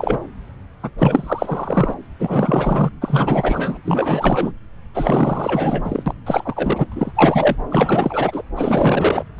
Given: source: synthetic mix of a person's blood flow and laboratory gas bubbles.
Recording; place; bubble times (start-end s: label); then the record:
Doppler ultrasound of blood flow; subclavian vein
0.00-0.18 s: bubbles
0.82-0.91 s: bubbles
0.98-1.94 s: bubbles
2.19-2.90 s: bubbles
3.01-3.78 s: bubbles
3.84-4.52 s: bubbles
4.94-6.03 s: bubbles
6.06-6.13 s: bubbles
6.25-6.87 s: bubbles
6.92-7.12 s: bubbles
7.15-7.56 s: bubbles
7.70-8.42 s: bubbles
8.55-9.24 s: bubbles
9.38-9.40 s: bubbles
From the record:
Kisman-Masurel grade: 444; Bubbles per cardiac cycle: continuous sound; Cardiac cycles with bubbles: 100%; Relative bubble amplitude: maximal (0.775 to 0.999); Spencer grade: 4 (maximum detectable bubble signal sounding continuously throughout systole and diastole of every cardiac period, and overriding the amplitude of the normal cardiac signals); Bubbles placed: anywhere in the cardiac cycle